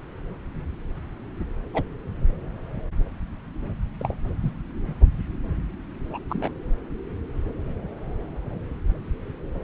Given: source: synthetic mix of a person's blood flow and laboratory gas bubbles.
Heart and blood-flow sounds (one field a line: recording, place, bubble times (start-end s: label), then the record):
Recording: Doppler ultrasound of blood flow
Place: subclavian vein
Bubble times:
1.73-1.83 s: bubbles
4.00-4.14 s: bubbles
4.42-4.51 s: bubbles
6.11-6.18 s: bubbles
6.29-6.51 s: bubbles
From the record:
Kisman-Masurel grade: 122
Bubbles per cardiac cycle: 1 to 2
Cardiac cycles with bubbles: 10 to 50%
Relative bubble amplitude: moderate (0.250 to 0.450)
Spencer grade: 2 (many but less than half of the cardiac periods contain bubble signals, singularly or in groups)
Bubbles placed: anywhere in the cardiac cycle